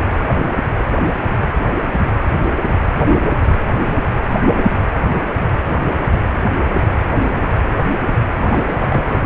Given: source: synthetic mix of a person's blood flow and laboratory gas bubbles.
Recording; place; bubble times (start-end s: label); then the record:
Doppler ultrasound of blood flow; precordium
8.41-9.07 s: bubbles
From the record:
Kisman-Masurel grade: 211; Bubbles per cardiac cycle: several, 3 to 8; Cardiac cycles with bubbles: 1 to 10%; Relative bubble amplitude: barely perceptible (0.100 to 0.250); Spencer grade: 1 (occasional bubble signal discernible with the cardiac motion signal, with majority of cardiac periods free of bubbles); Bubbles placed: anywhere in the cardiac cycle